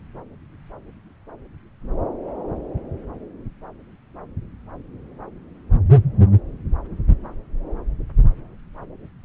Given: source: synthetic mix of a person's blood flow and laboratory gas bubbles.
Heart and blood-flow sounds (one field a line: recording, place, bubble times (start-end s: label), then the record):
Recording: Doppler ultrasound of blood flow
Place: subclavian vein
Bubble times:
no bubbles
From the record:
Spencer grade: 0 (complete lack of bubble signals)